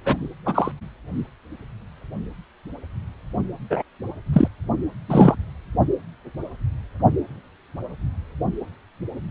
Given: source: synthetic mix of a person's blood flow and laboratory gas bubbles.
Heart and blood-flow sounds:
Doppler ultrasound of blood flow; precordium
0.04-0.29 s: bubbles
0.45-0.71 s: bubbles
3.70-3.83 s: bubbles
4.33-4.48 s: bubbles
5.08-5.36 s: bubbles
From the record:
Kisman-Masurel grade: 223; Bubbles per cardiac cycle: several, 3 to 8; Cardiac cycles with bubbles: 10 to 50%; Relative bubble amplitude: loud (0.450 to 0.775); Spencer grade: 2 (many but less than half of the cardiac periods contain bubble signals, singularly or in groups); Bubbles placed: only in the low amplitude regions of the cardiac cycle

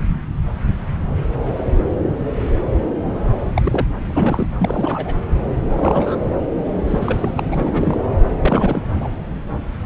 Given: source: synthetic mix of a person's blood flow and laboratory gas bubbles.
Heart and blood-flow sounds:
Doppler ultrasound of blood flow; subclavian vein
3.56-3.62 s: bubbles
3.65-3.88 s: bubbles
4.06-4.46 s: bubbles
4.59-5.15 s: bubbles
5.69-6.15 s: bubbles
6.86-7.43 s: bubbles
7.51-7.97 s: bubbles
8.40-8.83 s: bubbles
8.99-9.08 s: bubbles
From the record:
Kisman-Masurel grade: 222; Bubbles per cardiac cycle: several, 3 to 8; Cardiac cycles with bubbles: 10 to 50%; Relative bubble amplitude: moderate (0.250 to 0.450); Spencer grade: 2 (many but less than half of the cardiac periods contain bubble signals, singularly or in groups); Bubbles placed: anywhere in the cardiac cycle

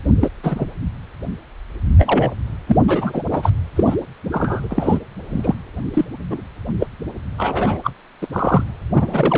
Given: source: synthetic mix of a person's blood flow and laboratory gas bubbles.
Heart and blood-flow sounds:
Doppler ultrasound of blood flow; precordium
0.21-0.30 s: bubbles
0.43-0.67 s: bubbles
1.98-2.31 s: bubbles
2.67-2.77 s: bubbles
2.88-3.23 s: bubbles
3.31-3.50 s: bubbles
3.76-3.84 s: bubbles
3.86-3.96 s: bubbles
4.31-4.68 s: bubbles
4.71-4.98 s: bubbles
5.29-5.55 s: bubbles
5.94-6.05 s: bubbles
6.30-6.41 s: bubbles
6.79-6.87 s: bubbles
7.38-7.79 s: bubbles
7.83-7.91 s: bubbles
8.21-8.27 s: bubbles
8.32-8.63 s: bubbles
8.95-9.38 s: bubbles
From the record:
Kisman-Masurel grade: 233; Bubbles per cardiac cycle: several, 3 to 8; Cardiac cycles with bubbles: 50 to 99%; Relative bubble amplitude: loud (0.450 to 0.775); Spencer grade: 3 (all of the cardiac periods contain showers or single bubble signals, but not dominating or overriding the cardiac motion signals); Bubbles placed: anywhere in the cardiac cycle

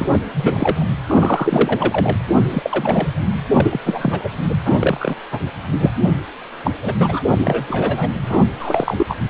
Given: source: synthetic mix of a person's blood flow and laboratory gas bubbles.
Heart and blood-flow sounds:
Doppler ultrasound of blood flow; precordium
0.00-0.09 s: bubbles
0.12-0.18 s: bubbles
0.34-0.85 s: bubbles
1.06-2.13 s: bubbles
2.50-3.08 s: bubbles
3.54-3.81 s: bubbles
3.85-4.30 s: bubbles
4.49-4.55 s: bubbles
4.65-4.77 s: bubbles
4.79-5.16 s: bubbles
5.32-5.40 s: bubbles
5.79-5.91 s: bubbles
6.65-6.71 s: bubbles
6.82-6.94 s: bubbles
7.00-7.20 s: bubbles
7.31-7.67 s: bubbles
7.70-8.10 s: bubbles
8.23-8.44 s: bubbles
8.59-9.15 s: bubbles
From the record:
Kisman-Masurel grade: 232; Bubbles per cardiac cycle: several, 3 to 8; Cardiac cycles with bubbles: 50 to 99%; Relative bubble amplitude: moderate (0.250 to 0.450); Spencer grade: 3 (all of the cardiac periods contain showers or single bubble signals, but not dominating or overriding the cardiac motion signals); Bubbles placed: anywhere in the cardiac cycle

